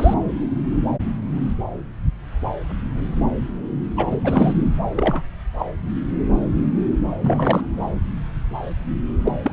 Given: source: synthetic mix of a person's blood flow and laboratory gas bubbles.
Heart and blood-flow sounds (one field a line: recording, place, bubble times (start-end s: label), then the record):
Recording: Doppler ultrasound of blood flow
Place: subclavian vein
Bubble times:
0.00-0.14 s: bubbles
3.96-4.17 s: bubbles
4.24-4.54 s: bubbles
4.83-5.23 s: bubbles
5.59-5.71 s: bubbles
7.21-7.63 s: bubbles
9.25-9.32 s: bubbles
9.42-9.53 s: bubbles
From the record:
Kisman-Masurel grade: 222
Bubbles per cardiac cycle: several, 3 to 8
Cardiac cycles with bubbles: 10 to 50%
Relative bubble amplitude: moderate (0.250 to 0.450)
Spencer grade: 2 (many but less than half of the cardiac periods contain bubble signals, singularly or in groups)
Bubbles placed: anywhere in the cardiac cycle